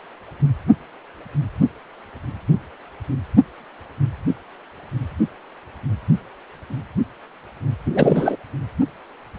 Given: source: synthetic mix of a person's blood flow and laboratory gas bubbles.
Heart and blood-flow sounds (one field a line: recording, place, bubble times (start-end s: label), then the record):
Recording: Doppler ultrasound of blood flow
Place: precordium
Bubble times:
7.86-8.36 s: bubbles
From the record:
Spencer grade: 2 (many but less than half of the cardiac periods contain bubble signals, singularly or in groups)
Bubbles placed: only in the low amplitude regions of the cardiac cycle